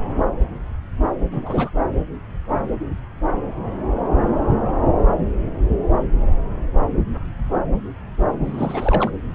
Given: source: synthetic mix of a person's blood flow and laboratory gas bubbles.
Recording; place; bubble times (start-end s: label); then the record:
Doppler ultrasound of blood flow; subclavian vein
1.31-1.69 s: bubbles
8.45-9.10 s: bubbles
From the record:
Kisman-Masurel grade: 221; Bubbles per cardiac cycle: several, 3 to 8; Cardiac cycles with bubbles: 10 to 50%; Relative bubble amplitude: barely perceptible (0.100 to 0.250); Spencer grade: 2 (many but less than half of the cardiac periods contain bubble signals, singularly or in groups); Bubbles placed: anywhere in the cardiac cycle